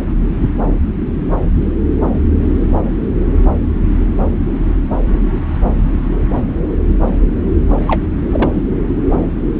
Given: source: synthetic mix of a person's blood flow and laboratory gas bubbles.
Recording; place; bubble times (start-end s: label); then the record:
Doppler ultrasound of blood flow; subclavian vein
7.87-8.01 s: bubbles
8.31-8.51 s: bubbles
From the record:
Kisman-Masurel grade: 113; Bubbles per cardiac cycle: 1 to 2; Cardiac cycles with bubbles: 1 to 10%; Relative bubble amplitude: loud (0.450 to 0.775); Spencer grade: 1 (occasional bubble signal discernible with the cardiac motion signal, with majority of cardiac periods free of bubbles); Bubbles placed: anywhere in the cardiac cycle